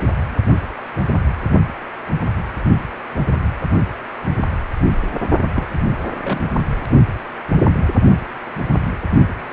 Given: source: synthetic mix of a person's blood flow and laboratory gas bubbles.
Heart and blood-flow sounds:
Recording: Doppler ultrasound of blood flow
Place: precordium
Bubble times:
4.84-4.92 s: bubbles
5.53-5.67 s: bubbles
6.23-6.60 s: bubbles
From the record:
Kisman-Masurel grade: 122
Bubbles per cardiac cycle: 1 to 2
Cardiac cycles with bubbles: 10 to 50%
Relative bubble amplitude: moderate (0.250 to 0.450)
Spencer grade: 2 (many but less than half of the cardiac periods contain bubble signals, singularly or in groups)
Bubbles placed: only in the low amplitude regions of the cardiac cycle

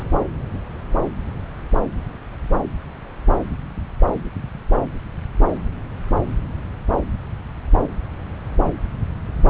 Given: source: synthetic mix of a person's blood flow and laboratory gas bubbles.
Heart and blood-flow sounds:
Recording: Doppler ultrasound of blood flow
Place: subclavian vein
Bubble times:
0.00-0.03 s: bubbles
From the record:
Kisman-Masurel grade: 112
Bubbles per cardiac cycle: 1 to 2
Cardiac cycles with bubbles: 1 to 10%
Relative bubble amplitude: moderate (0.250 to 0.450)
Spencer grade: 1 (occasional bubble signal discernible with the cardiac motion signal, with majority of cardiac periods free of bubbles)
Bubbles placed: anywhere in the cardiac cycle

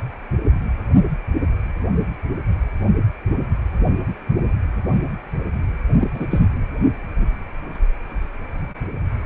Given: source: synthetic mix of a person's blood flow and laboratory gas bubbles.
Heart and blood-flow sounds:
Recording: Doppler ultrasound of blood flow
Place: precordium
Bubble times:
6.00-6.08 s: bubbles
6.13-6.26 s: bubbles
6.31-6.46 s: bubbles
From the record:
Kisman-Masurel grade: 223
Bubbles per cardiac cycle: several, 3 to 8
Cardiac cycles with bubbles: 10 to 50%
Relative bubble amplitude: loud (0.450 to 0.775)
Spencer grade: 2 (many but less than half of the cardiac periods contain bubble signals, singularly or in groups)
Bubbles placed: anywhere in the cardiac cycle

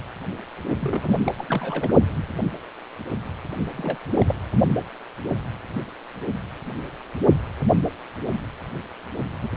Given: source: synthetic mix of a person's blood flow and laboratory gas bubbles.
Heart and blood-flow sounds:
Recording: Doppler ultrasound of blood flow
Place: precordium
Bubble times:
0.80-1.16 s: bubbles
1.24-1.32 s: bubbles
1.37-1.45 s: bubbles
1.47-1.94 s: bubbles
3.77-3.97 s: bubbles
4.19-4.35 s: bubbles
9.41-9.49 s: bubbles
From the record:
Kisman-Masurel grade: 221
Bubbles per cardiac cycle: several, 3 to 8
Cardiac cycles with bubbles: 10 to 50%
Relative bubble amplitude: barely perceptible (0.100 to 0.250)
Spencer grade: 2 (many but less than half of the cardiac periods contain bubble signals, singularly or in groups)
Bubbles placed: only in the low amplitude regions of the cardiac cycle

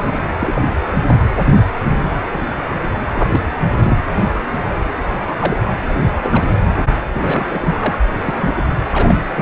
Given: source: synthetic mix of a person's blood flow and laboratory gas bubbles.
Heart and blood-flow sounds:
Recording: Doppler ultrasound of blood flow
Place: precordium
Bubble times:
0.00-0.28 s: bubbles
0.39-0.62 s: bubbles
1.06-1.19 s: bubbles
1.28-1.33 s: bubbles
1.42-1.65 s: bubbles
1.90-2.15 s: bubbles
2.23-2.50 s: bubbles
3.06-3.29 s: bubbles
3.32-3.41 s: bubbles
3.79-3.98 s: bubbles
5.27-5.32 s: bubbles
5.38-5.72 s: bubbles
5.88-6.12 s: bubbles
6.22-6.51 s: bubbles
7.12-7.97 s: bubbles
8.14-8.62 s: bubbles
8.90-9.20 s: bubbles
9.35-9.41 s: bubbles
From the record:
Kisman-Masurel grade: 232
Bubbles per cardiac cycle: several, 3 to 8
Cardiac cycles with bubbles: 50 to 99%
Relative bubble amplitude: moderate (0.250 to 0.450)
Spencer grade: 3 (all of the cardiac periods contain showers or single bubble signals, but not dominating or overriding the cardiac motion signals)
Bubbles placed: anywhere in the cardiac cycle

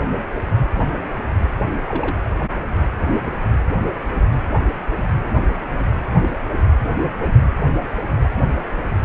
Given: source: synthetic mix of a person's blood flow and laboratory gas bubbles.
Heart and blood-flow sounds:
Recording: Doppler ultrasound of blood flow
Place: precordium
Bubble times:
1.88-2.17 s: bubbles
6.20-6.28 s: bubbles
6.36-6.41 s: bubbles
From the record:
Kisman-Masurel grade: 121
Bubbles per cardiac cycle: 1 to 2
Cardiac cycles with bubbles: 10 to 50%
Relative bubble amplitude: barely perceptible (0.100 to 0.250)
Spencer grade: 2 (many but less than half of the cardiac periods contain bubble signals, singularly or in groups)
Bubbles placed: anywhere in the cardiac cycle

